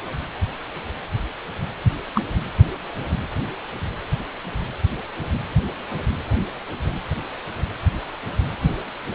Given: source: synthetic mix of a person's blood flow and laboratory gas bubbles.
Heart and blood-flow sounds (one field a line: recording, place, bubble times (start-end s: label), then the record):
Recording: Doppler ultrasound of blood flow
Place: precordium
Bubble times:
2.15-2.23 s: bubbles
From the record:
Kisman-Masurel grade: 113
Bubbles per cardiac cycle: 1 to 2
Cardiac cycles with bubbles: 1 to 10%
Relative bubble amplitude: loud (0.450 to 0.775)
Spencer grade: 1 (occasional bubble signal discernible with the cardiac motion signal, with majority of cardiac periods free of bubbles)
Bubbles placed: anywhere in the cardiac cycle